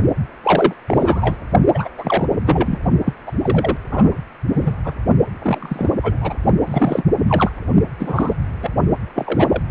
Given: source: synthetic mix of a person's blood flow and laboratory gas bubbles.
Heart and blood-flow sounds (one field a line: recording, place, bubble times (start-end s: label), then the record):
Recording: Doppler ultrasound of blood flow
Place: precordium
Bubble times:
0.43-0.73 s: bubbles
0.86-1.37 s: bubbles
1.74-1.88 s: bubbles
1.98-2.26 s: bubbles
2.46-2.79 s: bubbles
3.05-3.13 s: bubbles
3.26-3.31 s: bubbles
3.38-3.77 s: bubbles
3.91-4.18 s: bubbles
4.54-4.71 s: bubbles
4.84-4.94 s: bubbles
5.39-5.90 s: bubbles
6.03-6.17 s: bubbles
6.21-6.34 s: bubbles
6.65-7.04 s: bubbles
7.28-7.51 s: bubbles
7.99-8.35 s: bubbles
8.61-8.71 s: bubbles
9.15-9.62 s: bubbles
From the record:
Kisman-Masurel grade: 243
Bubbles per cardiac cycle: several, 3 to 8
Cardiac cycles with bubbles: 100%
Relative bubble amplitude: loud (0.450 to 0.775)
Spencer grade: 3 (all of the cardiac periods contain showers or single bubble signals, but not dominating or overriding the cardiac motion signals)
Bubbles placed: only in the low amplitude regions of the cardiac cycle